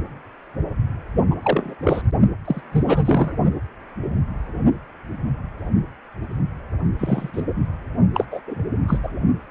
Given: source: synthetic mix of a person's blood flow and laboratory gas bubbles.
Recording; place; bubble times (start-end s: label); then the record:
Doppler ultrasound of blood flow; precordium
1.30-1.35 s: bubbles
1.43-1.75 s: bubbles
1.83-2.02 s: bubbles
2.44-2.62 s: bubbles
2.71-3.37 s: bubbles
6.99-7.42 s: bubbles
8.14-8.25 s: bubbles
8.31-8.41 s: bubbles
8.47-8.62 s: bubbles
8.88-8.98 s: bubbles
9.03-9.11 s: bubbles
From the record:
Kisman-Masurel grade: 222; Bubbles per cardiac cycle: several, 3 to 8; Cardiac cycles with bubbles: 10 to 50%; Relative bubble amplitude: moderate (0.250 to 0.450); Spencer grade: 2 (many but less than half of the cardiac periods contain bubble signals, singularly or in groups); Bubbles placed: only in the low amplitude regions of the cardiac cycle